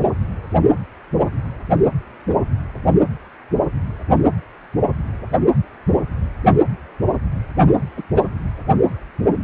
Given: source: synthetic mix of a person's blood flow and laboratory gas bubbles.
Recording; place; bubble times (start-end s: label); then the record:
Doppler ultrasound of blood flow; precordium
7.97-8.02 s: bubbles
8.14-8.23 s: bubbles
From the record:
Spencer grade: 1 (occasional bubble signal discernible with the cardiac motion signal, with majority of cardiac periods free of bubbles); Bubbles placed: anywhere in the cardiac cycle